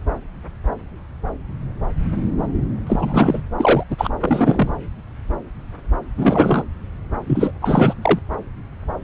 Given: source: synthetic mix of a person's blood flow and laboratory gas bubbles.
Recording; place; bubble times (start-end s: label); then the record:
Doppler ultrasound of blood flow; subclavian vein
2.87-3.42 s: bubbles
3.58-3.84 s: bubbles
3.90-4.09 s: bubbles
4.19-4.72 s: bubbles
6.17-6.64 s: bubbles
7.26-7.51 s: bubbles
7.62-7.95 s: bubbles
8.02-8.19 s: bubbles
From the record:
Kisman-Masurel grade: 223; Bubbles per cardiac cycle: several, 3 to 8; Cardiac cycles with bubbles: 10 to 50%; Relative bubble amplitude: loud (0.450 to 0.775); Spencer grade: 2 (many but less than half of the cardiac periods contain bubble signals, singularly or in groups); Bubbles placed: anywhere in the cardiac cycle